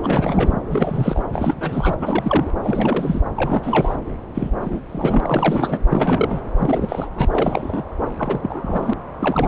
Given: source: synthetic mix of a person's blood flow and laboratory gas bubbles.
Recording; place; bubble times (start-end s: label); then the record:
Doppler ultrasound of blood flow; subclavian vein
0.03-0.60 s: bubbles
0.70-1.24 s: bubbles
1.32-1.55 s: bubbles
1.60-1.96 s: bubbles
2.00-2.50 s: bubbles
2.63-3.21 s: bubbles
3.36-3.96 s: bubbles
4.35-4.50 s: bubbles
4.61-4.80 s: bubbles
4.89-5.78 s: bubbles
5.89-6.40 s: bubbles
6.58-7.08 s: bubbles
7.15-7.26 s: bubbles
7.30-7.84 s: bubbles
8.18-8.94 s: bubbles
9.21-9.48 s: bubbles
From the record:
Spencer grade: 3 (all of the cardiac periods contain showers or single bubble signals, but not dominating or overriding the cardiac motion signals); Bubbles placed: anywhere in the cardiac cycle